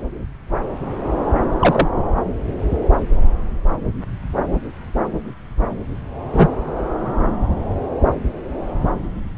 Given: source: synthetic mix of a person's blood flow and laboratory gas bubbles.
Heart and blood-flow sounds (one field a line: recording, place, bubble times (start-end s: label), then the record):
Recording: Doppler ultrasound of blood flow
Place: subclavian vein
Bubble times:
1.59-1.88 s: bubbles
6.32-6.48 s: bubbles
From the record:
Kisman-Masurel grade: 123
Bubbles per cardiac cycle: 1 to 2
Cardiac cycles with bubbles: 10 to 50%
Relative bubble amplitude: loud (0.450 to 0.775)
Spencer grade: 2 (many but less than half of the cardiac periods contain bubble signals, singularly or in groups)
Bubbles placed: anywhere in the cardiac cycle